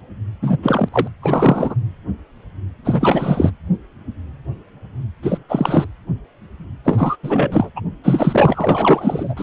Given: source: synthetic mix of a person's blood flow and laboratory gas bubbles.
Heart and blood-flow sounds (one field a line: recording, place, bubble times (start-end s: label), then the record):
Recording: Doppler ultrasound of blood flow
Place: precordium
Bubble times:
0.42-0.57 s: bubbles
0.62-0.89 s: bubbles
0.92-1.07 s: bubbles
1.22-1.75 s: bubbles
2.85-3.50 s: bubbles
5.22-5.38 s: bubbles
5.49-5.86 s: bubbles
6.84-7.17 s: bubbles
7.22-7.70 s: bubbles
7.75-7.81 s: bubbles
8.03-9.34 s: bubbles
9.36-9.43 s: bubbles
From the record:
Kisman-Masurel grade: 333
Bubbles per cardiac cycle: rolling drumbeat, 9 or more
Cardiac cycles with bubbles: 50 to 99%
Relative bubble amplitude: loud (0.450 to 0.775)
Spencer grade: 3 (all of the cardiac periods contain showers or single bubble signals, but not dominating or overriding the cardiac motion signals)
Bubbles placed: anywhere in the cardiac cycle